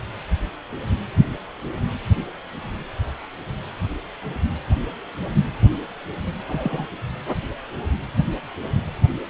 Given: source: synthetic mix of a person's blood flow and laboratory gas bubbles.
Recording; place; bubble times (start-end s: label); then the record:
Doppler ultrasound of blood flow; precordium
6.47-6.88 s: bubbles
From the record:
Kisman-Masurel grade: 112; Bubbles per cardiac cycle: 1 to 2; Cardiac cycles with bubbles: 1 to 10%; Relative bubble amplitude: moderate (0.250 to 0.450); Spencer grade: 1 (occasional bubble signal discernible with the cardiac motion signal, with majority of cardiac periods free of bubbles); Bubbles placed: anywhere in the cardiac cycle